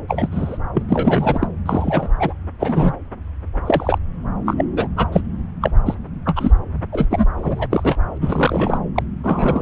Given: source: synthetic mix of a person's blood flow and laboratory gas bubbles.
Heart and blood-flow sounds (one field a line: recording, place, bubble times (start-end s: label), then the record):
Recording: Doppler ultrasound of blood flow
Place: subclavian vein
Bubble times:
0.08-0.28 s: bubbles
0.32-0.57 s: bubbles
0.74-0.82 s: bubbles
0.89-1.47 s: bubbles
1.66-2.09 s: bubbles
2.19-2.33 s: bubbles
2.60-2.93 s: bubbles
3.65-3.98 s: bubbles
4.45-4.54 s: bubbles
4.57-4.64 s: bubbles
4.75-4.88 s: bubbles
4.96-5.07 s: bubbles
5.12-5.21 s: bubbles
5.61-5.71 s: bubbles
5.85-5.95 s: bubbles
6.25-6.51 s: bubbles
6.92-7.06 s: bubbles
7.10-7.25 s: bubbles
7.36-7.67 s: bubbles
7.70-7.96 s: bubbles
8.21-8.78 s: bubbles
8.96-9.03 s: bubbles
9.24-9.62 s: bubbles
From the record:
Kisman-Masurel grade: 243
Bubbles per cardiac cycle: several, 3 to 8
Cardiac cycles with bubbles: 100%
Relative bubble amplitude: loud (0.450 to 0.775)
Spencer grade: 3 (all of the cardiac periods contain showers or single bubble signals, but not dominating or overriding the cardiac motion signals)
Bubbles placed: anywhere in the cardiac cycle